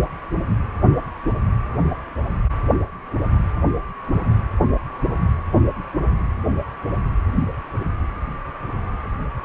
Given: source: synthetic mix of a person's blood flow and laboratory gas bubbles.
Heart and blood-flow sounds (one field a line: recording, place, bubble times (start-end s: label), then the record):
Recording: Doppler ultrasound of blood flow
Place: precordium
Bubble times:
no bubbles
From the record:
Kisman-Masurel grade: 000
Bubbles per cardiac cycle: 0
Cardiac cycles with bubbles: 0%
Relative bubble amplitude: no bubbles discernible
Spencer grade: 0 (complete lack of bubble signals)